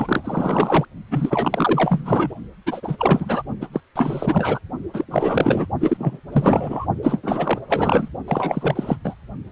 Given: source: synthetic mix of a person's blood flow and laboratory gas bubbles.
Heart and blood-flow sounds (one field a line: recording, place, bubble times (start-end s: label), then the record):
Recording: Doppler ultrasound of blood flow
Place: precordium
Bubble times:
0.00-0.85 s: bubbles
1.10-2.35 s: bubbles
2.66-3.42 s: bubbles
3.61-3.67 s: bubbles
3.73-3.80 s: bubbles
3.95-4.59 s: bubbles
4.93-5.05 s: bubbles
5.11-5.67 s: bubbles
5.80-6.17 s: bubbles
6.32-6.86 s: bubbles
7.03-7.58 s: bubbles
7.69-8.08 s: bubbles
8.28-8.97 s: bubbles
9.04-9.14 s: bubbles
From the record:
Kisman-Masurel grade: 444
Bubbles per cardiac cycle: continuous sound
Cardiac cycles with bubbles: 100%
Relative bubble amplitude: maximal (0.775 to 0.999)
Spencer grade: 4 (maximum detectable bubble signal sounding continuously throughout systole and diastole of every cardiac period, and overriding the amplitude of the normal cardiac signals)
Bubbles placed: only in the low amplitude regions of the cardiac cycle